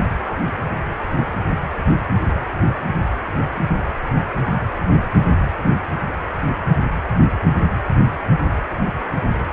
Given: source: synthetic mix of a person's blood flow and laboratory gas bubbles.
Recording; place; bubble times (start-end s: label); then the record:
Doppler ultrasound of blood flow; precordium
no bubbles
From the record:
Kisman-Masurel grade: 000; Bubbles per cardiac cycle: 0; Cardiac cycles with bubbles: 0%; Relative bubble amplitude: no bubbles discernible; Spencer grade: 0 (complete lack of bubble signals)